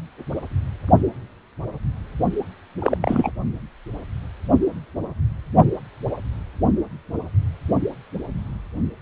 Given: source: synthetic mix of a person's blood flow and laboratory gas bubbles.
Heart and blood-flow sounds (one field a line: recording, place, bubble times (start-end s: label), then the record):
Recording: Doppler ultrasound of blood flow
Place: precordium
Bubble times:
2.79-2.97 s: bubbles
3.01-3.31 s: bubbles
From the record:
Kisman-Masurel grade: 212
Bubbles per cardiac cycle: several, 3 to 8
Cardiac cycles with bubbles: 1 to 10%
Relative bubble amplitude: moderate (0.250 to 0.450)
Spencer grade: 1 (occasional bubble signal discernible with the cardiac motion signal, with majority of cardiac periods free of bubbles)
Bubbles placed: only in the low amplitude regions of the cardiac cycle